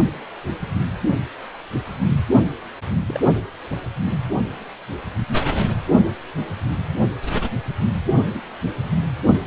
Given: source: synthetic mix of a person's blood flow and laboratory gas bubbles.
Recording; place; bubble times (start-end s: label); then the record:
Doppler ultrasound of blood flow; precordium
3.08-3.20 s: bubbles
8.34-8.41 s: bubbles
From the record:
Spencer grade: 2 (many but less than half of the cardiac periods contain bubble signals, singularly or in groups); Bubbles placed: anywhere in the cardiac cycle